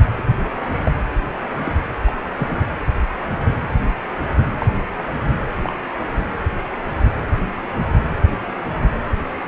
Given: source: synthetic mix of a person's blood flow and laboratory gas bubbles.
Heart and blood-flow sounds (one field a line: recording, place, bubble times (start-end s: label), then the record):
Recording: Doppler ultrasound of blood flow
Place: precordium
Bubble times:
0.18-0.23 s: bubbles
0.83-0.91 s: bubbles
1.65-1.73 s: bubbles
2.06-2.11 s: bubbles
2.38-2.61 s: bubbles
4.58-4.67 s: bubbles
5.63-5.73 s: bubbles
From the record:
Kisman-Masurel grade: 122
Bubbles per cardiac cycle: 1 to 2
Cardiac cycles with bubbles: 10 to 50%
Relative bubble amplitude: moderate (0.250 to 0.450)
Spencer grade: 2 (many but less than half of the cardiac periods contain bubble signals, singularly or in groups)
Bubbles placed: anywhere in the cardiac cycle